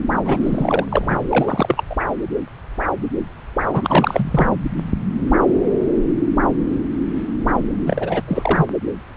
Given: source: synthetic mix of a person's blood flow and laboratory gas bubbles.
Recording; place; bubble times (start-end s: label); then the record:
Doppler ultrasound of blood flow; subclavian vein
0.25-0.86 s: bubbles
0.90-1.19 s: bubbles
1.30-1.84 s: bubbles
1.90-1.96 s: bubbles
3.73-4.49 s: bubbles
7.86-8.22 s: bubbles
8.27-8.68 s: bubbles
From the record:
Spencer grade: 3 (all of the cardiac periods contain showers or single bubble signals, but not dominating or overriding the cardiac motion signals); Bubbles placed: anywhere in the cardiac cycle